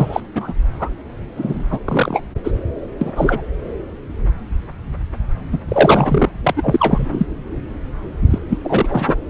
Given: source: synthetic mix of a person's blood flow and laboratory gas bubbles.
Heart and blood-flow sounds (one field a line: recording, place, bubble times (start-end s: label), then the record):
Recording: Doppler ultrasound of blood flow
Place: subclavian vein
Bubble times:
0.00-0.21 s: bubbles
0.35-0.53 s: bubbles
0.70-0.90 s: bubbles
1.36-1.80 s: bubbles
1.84-2.23 s: bubbles
2.44-2.52 s: bubbles
3.01-3.13 s: bubbles
3.16-3.42 s: bubbles
5.52-5.58 s: bubbles
5.68-6.29 s: bubbles
6.44-7.26 s: bubbles
8.30-8.38 s: bubbles
8.49-8.57 s: bubbles
8.63-9.15 s: bubbles
From the record:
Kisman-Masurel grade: 233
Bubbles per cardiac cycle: several, 3 to 8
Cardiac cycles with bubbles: 50 to 99%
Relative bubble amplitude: loud (0.450 to 0.775)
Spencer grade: 3 (all of the cardiac periods contain showers or single bubble signals, but not dominating or overriding the cardiac motion signals)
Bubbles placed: anywhere in the cardiac cycle